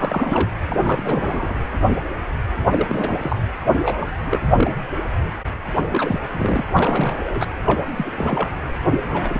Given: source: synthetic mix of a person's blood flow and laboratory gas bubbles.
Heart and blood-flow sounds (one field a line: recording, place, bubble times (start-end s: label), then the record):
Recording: Doppler ultrasound of blood flow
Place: precordium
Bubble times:
0.00-0.49 s: bubbles
0.68-1.58 s: bubbles
2.70-3.36 s: bubbles
3.84-4.12 s: bubbles
4.27-4.73 s: bubbles
5.88-6.20 s: bubbles
6.31-6.64 s: bubbles
6.76-7.46 s: bubbles
7.66-7.84 s: bubbles
7.96-8.49 s: bubbles
9.04-9.40 s: bubbles
From the record:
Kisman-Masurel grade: 332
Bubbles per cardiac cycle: rolling drumbeat, 9 or more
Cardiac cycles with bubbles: 50 to 99%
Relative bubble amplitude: moderate (0.250 to 0.450)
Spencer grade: 3 (all of the cardiac periods contain showers or single bubble signals, but not dominating or overriding the cardiac motion signals)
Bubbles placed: anywhere in the cardiac cycle